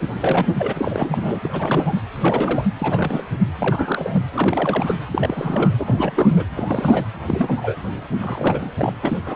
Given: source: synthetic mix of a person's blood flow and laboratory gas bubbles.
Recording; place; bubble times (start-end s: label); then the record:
Doppler ultrasound of blood flow; precordium
0.00-0.07 s: bubbles
0.20-2.01 s: bubbles
2.14-2.68 s: bubbles
2.79-3.33 s: bubbles
3.58-4.23 s: bubbles
4.32-4.95 s: bubbles
5.13-5.72 s: bubbles
5.79-6.47 s: bubbles
6.55-7.08 s: bubbles
7.28-7.76 s: bubbles
8.20-8.71 s: bubbles
8.77-8.93 s: bubbles
9.03-9.18 s: bubbles
9.26-9.36 s: bubbles
From the record:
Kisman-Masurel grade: 332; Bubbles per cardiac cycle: rolling drumbeat, 9 or more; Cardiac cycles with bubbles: 50 to 99%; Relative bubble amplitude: moderate (0.250 to 0.450); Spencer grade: 3 (all of the cardiac periods contain showers or single bubble signals, but not dominating or overriding the cardiac motion signals); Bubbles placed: anywhere in the cardiac cycle